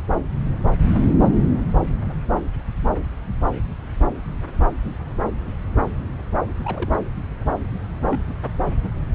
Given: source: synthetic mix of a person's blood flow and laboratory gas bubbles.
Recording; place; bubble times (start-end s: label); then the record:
Doppler ultrasound of blood flow; subclavian vein
6.64-7.00 s: bubbles
8.10-8.20 s: bubbles
From the record:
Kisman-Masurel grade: 111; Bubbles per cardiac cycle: 1 to 2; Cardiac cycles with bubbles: 1 to 10%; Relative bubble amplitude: barely perceptible (0.100 to 0.250); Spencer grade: 1 (occasional bubble signal discernible with the cardiac motion signal, with majority of cardiac periods free of bubbles); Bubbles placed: anywhere in the cardiac cycle